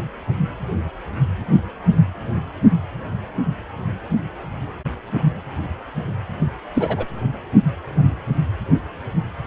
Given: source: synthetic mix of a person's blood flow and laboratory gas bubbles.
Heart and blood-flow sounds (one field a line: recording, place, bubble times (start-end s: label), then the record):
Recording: Doppler ultrasound of blood flow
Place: precordium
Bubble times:
6.74-7.06 s: bubbles
From the record:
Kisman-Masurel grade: 112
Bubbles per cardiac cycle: 1 to 2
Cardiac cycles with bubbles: 1 to 10%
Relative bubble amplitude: moderate (0.250 to 0.450)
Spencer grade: 1 (occasional bubble signal discernible with the cardiac motion signal, with majority of cardiac periods free of bubbles)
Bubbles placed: only in the low amplitude regions of the cardiac cycle